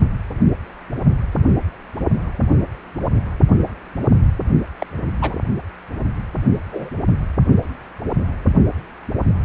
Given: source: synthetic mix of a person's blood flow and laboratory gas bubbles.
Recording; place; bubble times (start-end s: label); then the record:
Doppler ultrasound of blood flow; precordium
4.78-4.86 s: bubbles
5.21-5.36 s: bubbles
6.72-6.89 s: bubbles
From the record:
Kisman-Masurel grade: 122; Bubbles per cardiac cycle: 1 to 2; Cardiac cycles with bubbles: 10 to 50%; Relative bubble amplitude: moderate (0.250 to 0.450); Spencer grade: 2 (many but less than half of the cardiac periods contain bubble signals, singularly or in groups); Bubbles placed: only in the low amplitude regions of the cardiac cycle